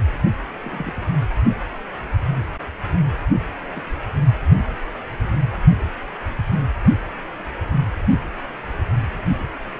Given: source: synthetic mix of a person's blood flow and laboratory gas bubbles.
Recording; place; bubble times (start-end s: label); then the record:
Doppler ultrasound of blood flow; precordium
0.62-1.07 s: bubbles
3.75-3.83 s: bubbles
From the record:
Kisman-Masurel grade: 121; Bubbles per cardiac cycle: 1 to 2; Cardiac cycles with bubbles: 10 to 50%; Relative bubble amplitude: barely perceptible (0.100 to 0.250); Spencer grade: 2 (many but less than half of the cardiac periods contain bubble signals, singularly or in groups); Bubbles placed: only in the low amplitude regions of the cardiac cycle